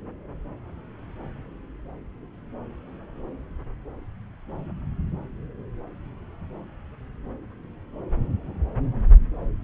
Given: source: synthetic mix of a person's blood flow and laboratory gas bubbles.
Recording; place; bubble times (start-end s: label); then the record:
Doppler ultrasound of blood flow; subclavian vein
no bubbles
From the record:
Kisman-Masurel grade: 000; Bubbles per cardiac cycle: 0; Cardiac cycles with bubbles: 0%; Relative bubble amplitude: no bubbles discernible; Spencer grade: 0 (complete lack of bubble signals)